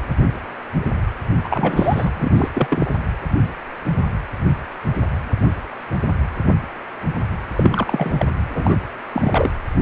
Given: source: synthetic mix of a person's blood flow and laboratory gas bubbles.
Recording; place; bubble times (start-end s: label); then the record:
Doppler ultrasound of blood flow; precordium
1.44-2.10 s: bubbles
2.16-2.32 s: bubbles
2.37-2.48 s: bubbles
2.54-2.90 s: bubbles
7.55-8.25 s: bubbles
8.49-8.76 s: bubbles
9.12-9.51 s: bubbles
From the record:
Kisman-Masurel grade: 222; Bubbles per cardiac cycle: several, 3 to 8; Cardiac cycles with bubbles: 10 to 50%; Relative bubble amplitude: moderate (0.250 to 0.450); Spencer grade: 2 (many but less than half of the cardiac periods contain bubble signals, singularly or in groups); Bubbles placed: anywhere in the cardiac cycle